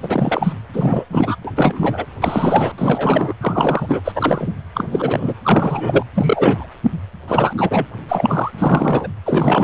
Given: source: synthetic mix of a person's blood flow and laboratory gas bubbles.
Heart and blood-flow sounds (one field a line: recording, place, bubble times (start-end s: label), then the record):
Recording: Doppler ultrasound of blood flow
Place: precordium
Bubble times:
0.02-0.53 s: bubbles
0.74-1.05 s: bubbles
1.10-1.36 s: bubbles
1.45-1.52 s: bubbles
1.56-2.05 s: bubbles
2.21-2.72 s: bubbles
2.77-3.34 s: bubbles
3.40-4.00 s: bubbles
4.04-4.12 s: bubbles
4.15-4.54 s: bubbles
4.75-5.34 s: bubbles
5.43-6.04 s: bubbles
6.15-6.68 s: bubbles
7.28-7.53 s: bubbles
7.57-7.88 s: bubbles
8.09-8.52 s: bubbles
8.58-9.09 s: bubbles
9.25-9.64 s: bubbles
From the record:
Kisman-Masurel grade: 343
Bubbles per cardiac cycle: rolling drumbeat, 9 or more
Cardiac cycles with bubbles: 100%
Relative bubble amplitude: loud (0.450 to 0.775)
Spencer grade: 3 (all of the cardiac periods contain showers or single bubble signals, but not dominating or overriding the cardiac motion signals)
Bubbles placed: anywhere in the cardiac cycle